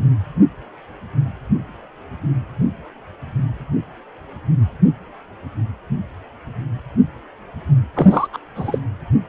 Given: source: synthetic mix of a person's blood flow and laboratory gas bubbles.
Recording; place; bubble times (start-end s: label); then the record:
Doppler ultrasound of blood flow; precordium
7.95-8.27 s: bubbles
8.32-8.38 s: bubbles
8.55-8.78 s: bubbles
From the record:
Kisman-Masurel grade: 212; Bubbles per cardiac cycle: several, 3 to 8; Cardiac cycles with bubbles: 1 to 10%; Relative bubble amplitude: moderate (0.250 to 0.450); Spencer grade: 1 (occasional bubble signal discernible with the cardiac motion signal, with majority of cardiac periods free of bubbles); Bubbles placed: anywhere in the cardiac cycle